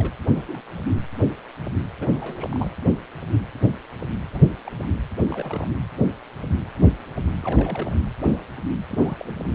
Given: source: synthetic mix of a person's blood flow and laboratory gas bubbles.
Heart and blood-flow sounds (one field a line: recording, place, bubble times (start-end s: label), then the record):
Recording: Doppler ultrasound of blood flow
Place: precordium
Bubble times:
0.00-0.13 s: bubbles
0.25-0.45 s: bubbles
0.48-0.61 s: bubbles
2.00-2.19 s: bubbles
2.21-2.71 s: bubbles
4.30-4.41 s: bubbles
4.67-4.70 s: bubbles
4.82-4.86 s: bubbles
5.28-5.67 s: bubbles
7.43-8.03 s: bubbles
8.88-9.35 s: bubbles
9.38-9.55 s: bubbles
From the record:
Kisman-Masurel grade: 221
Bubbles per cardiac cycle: several, 3 to 8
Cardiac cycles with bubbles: 10 to 50%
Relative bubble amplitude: barely perceptible (0.100 to 0.250)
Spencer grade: 2 (many but less than half of the cardiac periods contain bubble signals, singularly or in groups)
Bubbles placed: anywhere in the cardiac cycle